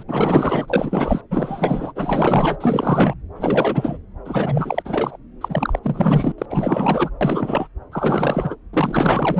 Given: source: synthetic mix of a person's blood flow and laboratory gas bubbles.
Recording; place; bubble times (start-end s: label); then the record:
Doppler ultrasound of blood flow; subclavian vein
0.00-0.04 s: bubbles
0.08-1.21 s: bubbles
1.31-1.92 s: bubbles
1.95-2.58 s: bubbles
2.60-3.14 s: bubbles
3.35-3.98 s: bubbles
4.24-4.82 s: bubbles
4.85-5.17 s: bubbles
5.40-5.79 s: bubbles
5.82-6.32 s: bubbles
6.38-6.46 s: bubbles
6.50-7.10 s: bubbles
7.21-7.67 s: bubbles
7.92-8.55 s: bubbles
8.73-9.39 s: bubbles
From the record:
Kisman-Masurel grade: 444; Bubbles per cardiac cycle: continuous sound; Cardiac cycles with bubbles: 100%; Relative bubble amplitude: maximal (0.775 to 0.999); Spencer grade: 4 (maximum detectable bubble signal sounding continuously throughout systole and diastole of every cardiac period, and overriding the amplitude of the normal cardiac signals); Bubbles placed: anywhere in the cardiac cycle